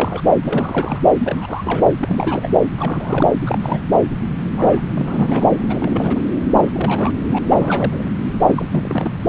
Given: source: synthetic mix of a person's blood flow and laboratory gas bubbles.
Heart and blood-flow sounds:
Doppler ultrasound of blood flow; subclavian vein
0.00-0.22 s: bubbles
0.41-1.00 s: bubbles
1.19-1.91 s: bubbles
1.99-2.48 s: bubbles
2.77-3.27 s: bubbles
3.42-3.80 s: bubbles
4.56-4.81 s: bubbles
4.95-5.43 s: bubbles
5.55-6.20 s: bubbles
6.62-7.11 s: bubbles
7.27-7.38 s: bubbles
7.47-8.10 s: bubbles
8.45-8.66 s: bubbles
8.71-9.12 s: bubbles
From the record:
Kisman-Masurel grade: 342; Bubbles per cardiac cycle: rolling drumbeat, 9 or more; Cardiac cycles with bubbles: 100%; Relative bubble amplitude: moderate (0.250 to 0.450); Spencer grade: 3 (all of the cardiac periods contain showers or single bubble signals, but not dominating or overriding the cardiac motion signals); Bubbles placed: anywhere in the cardiac cycle

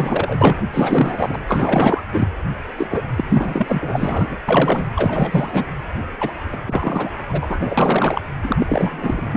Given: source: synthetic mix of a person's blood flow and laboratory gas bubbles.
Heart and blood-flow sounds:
Doppler ultrasound of blood flow; precordium
0.00-0.64 s: bubbles
0.70-1.39 s: bubbles
1.48-2.01 s: bubbles
2.13-2.28 s: bubbles
2.77-3.02 s: bubbles
3.15-3.24 s: bubbles
3.29-4.37 s: bubbles
4.48-4.85 s: bubbles
4.96-5.67 s: bubbles
6.20-6.32 s: bubbles
6.52-6.57 s: bubbles
6.67-7.10 s: bubbles
7.29-7.58 s: bubbles
7.60-8.21 s: bubbles
8.43-9.37 s: bubbles
From the record:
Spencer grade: 4 (maximum detectable bubble signal sounding continuously throughout systole and diastole of every cardiac period, and overriding the amplitude of the normal cardiac signals); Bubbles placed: anywhere in the cardiac cycle

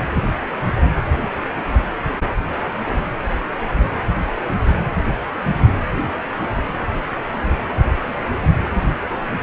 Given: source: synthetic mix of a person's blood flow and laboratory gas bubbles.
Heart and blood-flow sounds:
Doppler ultrasound of blood flow; precordium
no bubbles
From the record:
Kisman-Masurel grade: 000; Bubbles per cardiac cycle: 0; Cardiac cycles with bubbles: 0%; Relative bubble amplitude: no bubbles discernible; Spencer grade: 0 (complete lack of bubble signals)

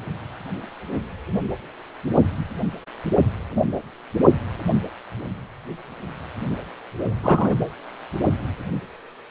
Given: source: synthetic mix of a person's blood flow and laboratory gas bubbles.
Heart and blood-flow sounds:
Doppler ultrasound of blood flow; precordium
7.23-7.55 s: bubbles
From the record:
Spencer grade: 2 (many but less than half of the cardiac periods contain bubble signals, singularly or in groups); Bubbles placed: anywhere in the cardiac cycle

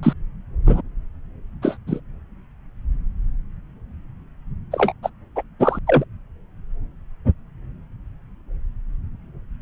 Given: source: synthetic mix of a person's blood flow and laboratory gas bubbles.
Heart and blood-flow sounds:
Doppler ultrasound of blood flow; subclavian vein
0.02-0.13 s: bubbles
0.66-0.81 s: bubbles
1.62-1.77 s: bubbles
1.86-2.00 s: bubbles
4.71-4.93 s: bubbles
5.03-5.10 s: bubbles
5.36-5.43 s: bubbles
5.59-5.79 s: bubbles
5.87-6.04 s: bubbles
From the record:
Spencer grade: 2 (many but less than half of the cardiac periods contain bubble signals, singularly or in groups); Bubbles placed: anywhere in the cardiac cycle

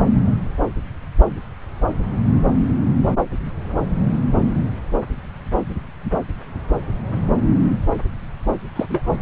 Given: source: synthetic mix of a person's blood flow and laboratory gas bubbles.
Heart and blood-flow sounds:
Doppler ultrasound of blood flow; subclavian vein
8.75-8.86 s: bubbles
8.89-9.03 s: bubbles
From the record:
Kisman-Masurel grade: 112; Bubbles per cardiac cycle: 1 to 2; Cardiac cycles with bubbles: 1 to 10%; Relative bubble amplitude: moderate (0.250 to 0.450); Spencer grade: 1 (occasional bubble signal discernible with the cardiac motion signal, with majority of cardiac periods free of bubbles); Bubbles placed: anywhere in the cardiac cycle

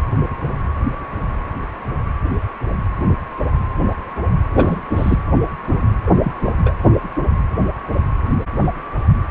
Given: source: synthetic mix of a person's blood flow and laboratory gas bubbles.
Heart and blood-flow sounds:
Doppler ultrasound of blood flow; precordium
4.55-4.80 s: bubbles
4.90-5.19 s: bubbles
6.06-6.12 s: bubbles
6.24-6.32 s: bubbles
6.42-6.53 s: bubbles
6.65-6.74 s: bubbles
From the record:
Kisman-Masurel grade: 222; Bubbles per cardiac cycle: several, 3 to 8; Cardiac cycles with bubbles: 10 to 50%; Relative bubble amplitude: moderate (0.250 to 0.450); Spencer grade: 2 (many but less than half of the cardiac periods contain bubble signals, singularly or in groups); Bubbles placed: anywhere in the cardiac cycle

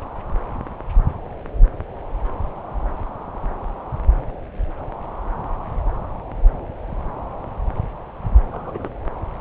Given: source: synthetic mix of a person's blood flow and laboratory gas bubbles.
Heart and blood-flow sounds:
Doppler ultrasound of blood flow; subclavian vein
8.52-8.88 s: bubbles
From the record:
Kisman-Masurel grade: 111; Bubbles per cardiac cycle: 1 to 2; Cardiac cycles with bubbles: 1 to 10%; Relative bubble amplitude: barely perceptible (0.100 to 0.250); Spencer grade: 1 (occasional bubble signal discernible with the cardiac motion signal, with majority of cardiac periods free of bubbles); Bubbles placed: anywhere in the cardiac cycle

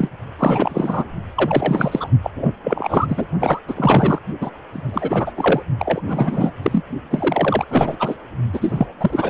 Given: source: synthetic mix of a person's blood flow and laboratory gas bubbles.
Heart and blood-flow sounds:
Doppler ultrasound of blood flow; precordium
0.00-0.09 s: bubbles
0.39-1.05 s: bubbles
1.36-2.08 s: bubbles
2.23-2.31 s: bubbles
2.35-2.52 s: bubbles
2.64-3.25 s: bubbles
3.40-3.60 s: bubbles
3.68-4.19 s: bubbles
4.40-4.50 s: bubbles
4.73-5.32 s: bubbles
5.36-5.62 s: bubbles
5.78-6.00 s: bubbles
6.07-6.51 s: bubbles
6.62-6.84 s: bubbles
7.10-7.65 s: bubbles
7.69-7.96 s: bubbles
7.99-8.15 s: bubbles
8.53-8.87 s: bubbles
8.99-9.30 s: bubbles
From the record:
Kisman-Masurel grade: 343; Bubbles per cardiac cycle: rolling drumbeat, 9 or more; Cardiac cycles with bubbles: 100%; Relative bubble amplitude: loud (0.450 to 0.775); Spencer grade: 3 (all of the cardiac periods contain showers or single bubble signals, but not dominating or overriding the cardiac motion signals); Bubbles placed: only in the low amplitude regions of the cardiac cycle

